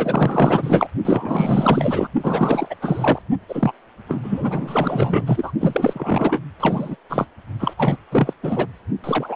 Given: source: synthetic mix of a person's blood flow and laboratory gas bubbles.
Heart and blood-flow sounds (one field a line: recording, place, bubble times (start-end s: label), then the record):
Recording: Doppler ultrasound of blood flow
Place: precordium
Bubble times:
0.00-0.87 s: bubbles
1.05-2.08 s: bubbles
2.21-2.75 s: bubbles
2.81-3.22 s: bubbles
3.48-3.73 s: bubbles
4.07-5.52 s: bubbles
5.60-6.40 s: bubbles
6.60-6.97 s: bubbles
7.09-7.26 s: bubbles
7.59-7.74 s: bubbles
7.77-7.97 s: bubbles
8.11-8.33 s: bubbles
8.42-8.67 s: bubbles
9.04-9.36 s: bubbles
From the record:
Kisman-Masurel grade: 444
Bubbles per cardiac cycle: continuous sound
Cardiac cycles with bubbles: 100%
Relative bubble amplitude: maximal (0.775 to 0.999)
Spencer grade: 4 (maximum detectable bubble signal sounding continuously throughout systole and diastole of every cardiac period, and overriding the amplitude of the normal cardiac signals)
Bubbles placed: only in the low amplitude regions of the cardiac cycle